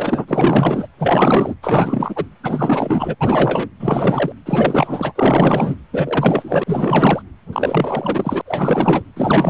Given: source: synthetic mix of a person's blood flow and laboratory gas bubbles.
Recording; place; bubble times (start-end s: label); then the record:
Doppler ultrasound of blood flow; precordium
0.00-0.87 s: bubbles
0.99-1.55 s: bubbles
1.61-2.24 s: bubbles
2.43-3.15 s: bubbles
3.21-3.69 s: bubbles
3.80-4.32 s: bubbles
4.46-5.12 s: bubbles
5.15-5.75 s: bubbles
5.93-6.63 s: bubbles
6.66-7.22 s: bubbles
7.53-8.42 s: bubbles
8.45-9.02 s: bubbles
9.16-9.50 s: bubbles
From the record:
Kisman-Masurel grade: 444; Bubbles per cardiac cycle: continuous sound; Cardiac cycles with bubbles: 100%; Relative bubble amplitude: maximal (0.775 to 0.999); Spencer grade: 4 (maximum detectable bubble signal sounding continuously throughout systole and diastole of every cardiac period, and overriding the amplitude of the normal cardiac signals); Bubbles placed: anywhere in the cardiac cycle